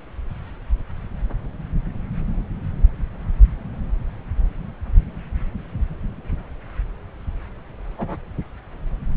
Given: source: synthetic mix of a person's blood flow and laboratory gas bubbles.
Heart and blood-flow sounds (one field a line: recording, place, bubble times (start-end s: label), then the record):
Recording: Doppler ultrasound of blood flow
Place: subclavian vein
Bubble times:
7.97-8.17 s: bubbles
From the record:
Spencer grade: 1 (occasional bubble signal discernible with the cardiac motion signal, with majority of cardiac periods free of bubbles)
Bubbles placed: anywhere in the cardiac cycle